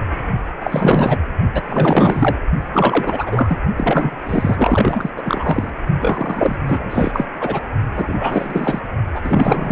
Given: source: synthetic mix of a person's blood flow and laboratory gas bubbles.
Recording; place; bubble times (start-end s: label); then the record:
Doppler ultrasound of blood flow; precordium
0.60-1.19 s: bubbles
1.54-1.62 s: bubbles
1.67-2.36 s: bubbles
2.73-3.57 s: bubbles
3.77-4.17 s: bubbles
4.25-5.10 s: bubbles
5.17-5.70 s: bubbles
6.00-6.58 s: bubbles
6.68-7.25 s: bubbles
7.41-7.60 s: bubbles
7.95-8.79 s: bubbles
9.14-9.21 s: bubbles
9.23-9.72 s: bubbles
From the record:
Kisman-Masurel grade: 444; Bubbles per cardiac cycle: continuous sound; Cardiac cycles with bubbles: 100%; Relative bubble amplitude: maximal (0.775 to 0.999); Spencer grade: 4 (maximum detectable bubble signal sounding continuously throughout systole and diastole of every cardiac period, and overriding the amplitude of the normal cardiac signals); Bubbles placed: only in the low amplitude regions of the cardiac cycle